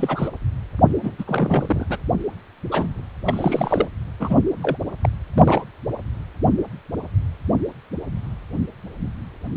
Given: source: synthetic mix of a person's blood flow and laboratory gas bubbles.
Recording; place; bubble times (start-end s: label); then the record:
Doppler ultrasound of blood flow; precordium
0.00-0.28 s: bubbles
1.01-1.12 s: bubbles
1.18-1.24 s: bubbles
1.26-1.85 s: bubbles
1.89-1.98 s: bubbles
2.71-3.02 s: bubbles
3.25-3.88 s: bubbles
4.20-4.41 s: bubbles
4.62-4.77 s: bubbles
5.01-5.09 s: bubbles
5.33-5.64 s: bubbles
From the record:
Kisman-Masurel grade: 232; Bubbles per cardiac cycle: several, 3 to 8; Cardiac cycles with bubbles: 50 to 99%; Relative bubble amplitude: moderate (0.250 to 0.450); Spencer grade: 3 (all of the cardiac periods contain showers or single bubble signals, but not dominating or overriding the cardiac motion signals); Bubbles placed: anywhere in the cardiac cycle